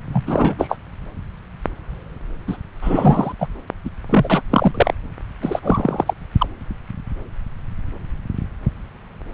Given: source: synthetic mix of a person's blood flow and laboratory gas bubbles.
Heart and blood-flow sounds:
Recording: Doppler ultrasound of blood flow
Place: subclavian vein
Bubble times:
0.12-0.24 s: bubbles
0.26-0.78 s: bubbles
2.48-2.57 s: bubbles
2.81-3.33 s: bubbles
3.40-3.47 s: bubbles
3.85-3.90 s: bubbles
4.09-4.42 s: bubbles
4.49-4.94 s: bubbles
5.42-5.59 s: bubbles
5.62-6.13 s: bubbles
6.38-6.46 s: bubbles
From the record:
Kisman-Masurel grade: 333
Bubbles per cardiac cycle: rolling drumbeat, 9 or more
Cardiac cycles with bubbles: 50 to 99%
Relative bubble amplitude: loud (0.450 to 0.775)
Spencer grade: 3 (all of the cardiac periods contain showers or single bubble signals, but not dominating or overriding the cardiac motion signals)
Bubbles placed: anywhere in the cardiac cycle

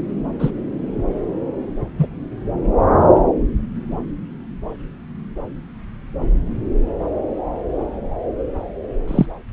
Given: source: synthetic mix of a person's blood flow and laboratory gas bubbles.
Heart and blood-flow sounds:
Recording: Doppler ultrasound of blood flow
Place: subclavian vein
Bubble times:
0.39-0.50 s: bubbles
1.98-2.08 s: bubbles
9.08-9.26 s: bubbles
From the record:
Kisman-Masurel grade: 123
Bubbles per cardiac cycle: 1 to 2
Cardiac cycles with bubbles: 10 to 50%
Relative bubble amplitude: loud (0.450 to 0.775)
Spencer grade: 2 (many but less than half of the cardiac periods contain bubble signals, singularly or in groups)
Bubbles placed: anywhere in the cardiac cycle

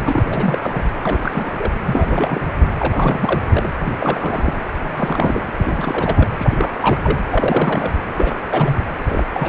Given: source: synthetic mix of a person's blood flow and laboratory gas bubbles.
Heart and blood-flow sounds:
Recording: Doppler ultrasound of blood flow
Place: precordium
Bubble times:
0.05-0.91 s: bubbles
1.03-1.52 s: bubbles
1.57-1.72 s: bubbles
1.85-2.57 s: bubbles
2.79-3.42 s: bubbles
3.49-3.69 s: bubbles
3.84-4.54 s: bubbles
4.83-5.41 s: bubbles
5.58-6.29 s: bubbles
6.38-6.76 s: bubbles
6.80-7.20 s: bubbles
7.30-7.91 s: bubbles
8.13-8.36 s: bubbles
8.50-8.84 s: bubbles
9.06-9.23 s: bubbles
9.33-9.49 s: bubbles
From the record:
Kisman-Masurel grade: 342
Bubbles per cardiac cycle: rolling drumbeat, 9 or more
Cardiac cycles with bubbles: 100%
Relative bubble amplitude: moderate (0.250 to 0.450)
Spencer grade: 3 (all of the cardiac periods contain showers or single bubble signals, but not dominating or overriding the cardiac motion signals)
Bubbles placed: anywhere in the cardiac cycle

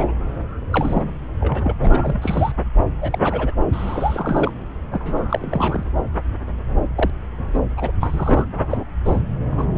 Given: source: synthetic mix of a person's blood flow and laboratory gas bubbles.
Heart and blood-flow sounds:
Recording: Doppler ultrasound of blood flow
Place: subclavian vein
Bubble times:
0.00-0.14 s: bubbles
0.71-1.03 s: bubbles
1.41-1.75 s: bubbles
1.80-2.52 s: bubbles
3.00-3.19 s: bubbles
3.23-3.54 s: bubbles
3.72-4.51 s: bubbles
4.92-5.83 s: bubbles
6.96-7.10 s: bubbles
7.53-7.59 s: bubbles
7.77-7.91 s: bubbles
8.00-8.45 s: bubbles
8.54-8.84 s: bubbles
9.05-9.22 s: bubbles
9.51-9.72 s: bubbles
From the record:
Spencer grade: 3 (all of the cardiac periods contain showers or single bubble signals, but not dominating or overriding the cardiac motion signals)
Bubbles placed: anywhere in the cardiac cycle

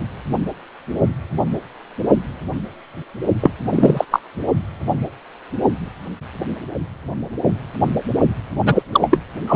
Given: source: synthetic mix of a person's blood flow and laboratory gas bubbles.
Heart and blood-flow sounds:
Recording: Doppler ultrasound of blood flow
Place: precordium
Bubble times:
3.40-3.50 s: bubbles
3.70-4.04 s: bubbles
4.11-4.21 s: bubbles
8.65-8.82 s: bubbles
8.92-9.18 s: bubbles
9.46-9.55 s: bubbles
From the record:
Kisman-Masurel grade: 223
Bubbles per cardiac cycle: several, 3 to 8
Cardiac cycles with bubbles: 10 to 50%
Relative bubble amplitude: loud (0.450 to 0.775)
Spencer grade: 2 (many but less than half of the cardiac periods contain bubble signals, singularly or in groups)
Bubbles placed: only in the low amplitude regions of the cardiac cycle

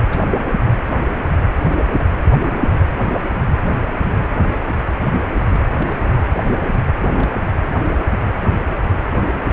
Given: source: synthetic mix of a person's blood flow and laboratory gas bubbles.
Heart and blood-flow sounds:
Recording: Doppler ultrasound of blood flow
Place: precordium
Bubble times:
0.00-0.07 s: bubbles
0.10-0.21 s: bubbles
1.68-2.23 s: bubbles
5.43-6.16 s: bubbles
6.33-6.38 s: bubbles
7.11-7.46 s: bubbles
9.10-9.31 s: bubbles
9.46-9.53 s: bubbles
From the record:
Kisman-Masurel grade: 221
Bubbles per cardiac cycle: several, 3 to 8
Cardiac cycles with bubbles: 10 to 50%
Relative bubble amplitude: barely perceptible (0.100 to 0.250)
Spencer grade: 2 (many but less than half of the cardiac periods contain bubble signals, singularly or in groups)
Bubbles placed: anywhere in the cardiac cycle

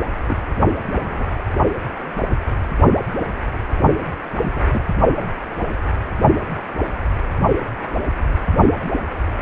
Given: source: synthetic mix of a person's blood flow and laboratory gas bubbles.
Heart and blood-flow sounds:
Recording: Doppler ultrasound of blood flow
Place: precordium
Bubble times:
0.27-0.36 s: bubbles
0.92-1.37 s: bubbles
4.42-4.70 s: bubbles
4.73-4.81 s: bubbles
5.19-5.29 s: bubbles
From the record:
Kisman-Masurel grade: 121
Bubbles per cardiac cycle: 1 to 2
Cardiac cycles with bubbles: 10 to 50%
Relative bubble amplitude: barely perceptible (0.100 to 0.250)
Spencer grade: 2 (many but less than half of the cardiac periods contain bubble signals, singularly or in groups)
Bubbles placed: only in the low amplitude regions of the cardiac cycle

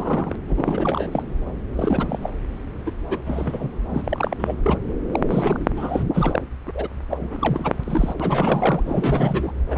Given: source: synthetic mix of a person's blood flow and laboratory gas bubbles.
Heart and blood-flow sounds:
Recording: Doppler ultrasound of blood flow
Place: subclavian vein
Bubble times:
0.00-0.35 s: bubbles
0.48-1.23 s: bubbles
1.73-2.30 s: bubbles
2.85-2.91 s: bubbles
3.00-3.19 s: bubbles
3.25-3.70 s: bubbles
3.89-4.54 s: bubbles
4.63-4.78 s: bubbles
5.12-5.21 s: bubbles
5.29-6.04 s: bubbles
6.13-6.40 s: bubbles
6.67-6.71 s: bubbles
6.74-6.88 s: bubbles
7.09-8.14 s: bubbles
8.19-8.82 s: bubbles
8.85-9.52 s: bubbles
9.68-9.78 s: bubbles
From the record:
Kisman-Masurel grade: 343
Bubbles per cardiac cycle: rolling drumbeat, 9 or more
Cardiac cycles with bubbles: 100%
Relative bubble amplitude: loud (0.450 to 0.775)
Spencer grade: 3 (all of the cardiac periods contain showers or single bubble signals, but not dominating or overriding the cardiac motion signals)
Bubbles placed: anywhere in the cardiac cycle

